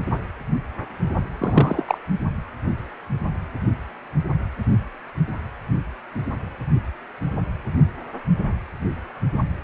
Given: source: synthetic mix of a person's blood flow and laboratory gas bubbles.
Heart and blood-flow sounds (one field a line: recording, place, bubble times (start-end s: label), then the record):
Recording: Doppler ultrasound of blood flow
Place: precordium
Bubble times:
1.38-1.98 s: bubbles
From the record:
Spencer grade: 1 (occasional bubble signal discernible with the cardiac motion signal, with majority of cardiac periods free of bubbles)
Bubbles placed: anywhere in the cardiac cycle